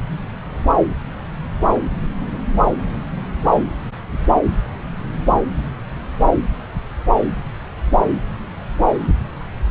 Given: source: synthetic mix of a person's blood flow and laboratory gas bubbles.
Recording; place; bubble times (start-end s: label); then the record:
Doppler ultrasound of blood flow; subclavian vein
no bubbles
From the record:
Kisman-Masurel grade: 000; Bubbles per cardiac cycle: 0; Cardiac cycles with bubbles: 0%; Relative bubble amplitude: no bubbles discernible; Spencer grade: 0 (complete lack of bubble signals)